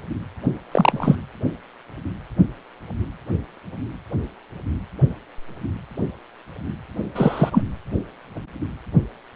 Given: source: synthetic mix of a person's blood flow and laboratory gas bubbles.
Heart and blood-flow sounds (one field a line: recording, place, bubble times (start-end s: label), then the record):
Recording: Doppler ultrasound of blood flow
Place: precordium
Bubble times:
0.72-1.16 s: bubbles
7.14-7.62 s: bubbles
From the record:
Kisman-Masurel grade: 123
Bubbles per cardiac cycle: 1 to 2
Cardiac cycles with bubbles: 10 to 50%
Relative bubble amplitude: loud (0.450 to 0.775)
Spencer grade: 2 (many but less than half of the cardiac periods contain bubble signals, singularly or in groups)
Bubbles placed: anywhere in the cardiac cycle